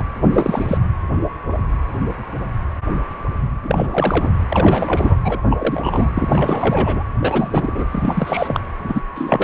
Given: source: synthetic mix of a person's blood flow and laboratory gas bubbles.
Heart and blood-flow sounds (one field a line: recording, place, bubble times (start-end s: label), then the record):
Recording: Doppler ultrasound of blood flow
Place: precordium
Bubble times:
0.00-0.04 s: bubbles
0.33-0.79 s: bubbles
3.62-4.30 s: bubbles
4.49-5.19 s: bubbles
5.25-5.42 s: bubbles
5.50-6.09 s: bubbles
6.16-7.04 s: bubbles
7.21-7.86 s: bubbles
7.91-8.60 s: bubbles
8.84-9.01 s: bubbles
9.15-9.44 s: bubbles
From the record:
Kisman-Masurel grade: 333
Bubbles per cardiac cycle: rolling drumbeat, 9 or more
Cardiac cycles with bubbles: 50 to 99%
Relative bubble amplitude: loud (0.450 to 0.775)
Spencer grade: 3 (all of the cardiac periods contain showers or single bubble signals, but not dominating or overriding the cardiac motion signals)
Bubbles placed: anywhere in the cardiac cycle